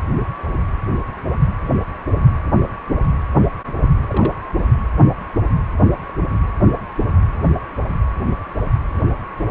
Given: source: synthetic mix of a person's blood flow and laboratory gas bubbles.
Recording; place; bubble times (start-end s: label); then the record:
Doppler ultrasound of blood flow; precordium
4.08-4.33 s: bubbles
From the record:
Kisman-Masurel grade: 111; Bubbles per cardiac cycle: 1 to 2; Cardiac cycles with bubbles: 1 to 10%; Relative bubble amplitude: barely perceptible (0.100 to 0.250); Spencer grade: 1 (occasional bubble signal discernible with the cardiac motion signal, with majority of cardiac periods free of bubbles); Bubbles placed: anywhere in the cardiac cycle